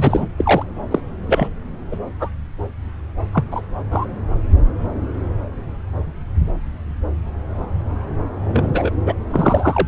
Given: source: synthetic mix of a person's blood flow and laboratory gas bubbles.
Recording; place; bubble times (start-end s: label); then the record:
Doppler ultrasound of blood flow; subclavian vein
0.00-0.26 s: bubbles
0.37-0.64 s: bubbles
0.90-1.00 s: bubbles
1.26-1.47 s: bubbles
1.91-1.99 s: bubbles
2.20-2.29 s: bubbles
3.33-3.44 s: bubbles
3.51-3.62 s: bubbles
3.90-4.05 s: bubbles
8.45-8.91 s: bubbles
9.05-9.13 s: bubbles
9.30-9.88 s: bubbles
From the record:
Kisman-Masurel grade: 233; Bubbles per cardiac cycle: several, 3 to 8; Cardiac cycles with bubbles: 50 to 99%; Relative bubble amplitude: loud (0.450 to 0.775); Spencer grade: 3 (all of the cardiac periods contain showers or single bubble signals, but not dominating or overriding the cardiac motion signals); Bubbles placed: anywhere in the cardiac cycle